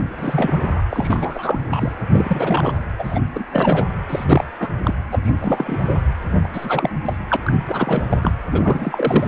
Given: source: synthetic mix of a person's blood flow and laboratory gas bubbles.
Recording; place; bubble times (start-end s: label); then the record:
Doppler ultrasound of blood flow; precordium
0.17-0.81 s: bubbles
0.90-1.59 s: bubbles
1.70-1.92 s: bubbles
2.12-2.73 s: bubbles
2.98-3.20 s: bubbles
3.34-3.45 s: bubbles
3.51-3.87 s: bubbles
4.09-4.24 s: bubbles
4.28-4.44 s: bubbles
4.59-4.70 s: bubbles
4.85-4.94 s: bubbles
5.12-5.20 s: bubbles
5.23-6.00 s: bubbles
6.44-6.48 s: bubbles
6.53-6.90 s: bubbles
7.04-7.17 s: bubbles
7.30-7.37 s: bubbles
7.45-7.53 s: bubbles
7.67-8.32 s: bubbles
8.51-9.28 s: bubbles
From the record:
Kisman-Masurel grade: 342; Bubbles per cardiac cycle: rolling drumbeat, 9 or more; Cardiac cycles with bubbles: 100%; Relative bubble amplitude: moderate (0.250 to 0.450); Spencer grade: 3 (all of the cardiac periods contain showers or single bubble signals, but not dominating or overriding the cardiac motion signals); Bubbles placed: anywhere in the cardiac cycle